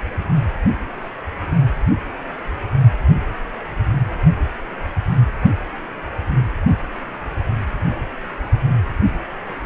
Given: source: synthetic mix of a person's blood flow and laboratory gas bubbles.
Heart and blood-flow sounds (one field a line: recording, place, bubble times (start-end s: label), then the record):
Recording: Doppler ultrasound of blood flow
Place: precordium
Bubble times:
no bubbles
From the record:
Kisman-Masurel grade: 000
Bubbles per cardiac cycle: 0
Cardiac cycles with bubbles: 0%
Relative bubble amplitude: no bubbles discernible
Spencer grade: 0 (complete lack of bubble signals)